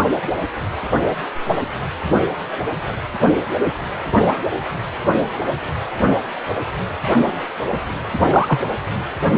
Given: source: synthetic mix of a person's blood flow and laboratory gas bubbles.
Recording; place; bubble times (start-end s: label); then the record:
Doppler ultrasound of blood flow; precordium
8.31-8.61 s: bubbles
From the record:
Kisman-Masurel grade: 113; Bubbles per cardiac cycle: 1 to 2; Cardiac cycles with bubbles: 1 to 10%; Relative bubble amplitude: loud (0.450 to 0.775); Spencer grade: 1 (occasional bubble signal discernible with the cardiac motion signal, with majority of cardiac periods free of bubbles); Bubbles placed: only in the low amplitude regions of the cardiac cycle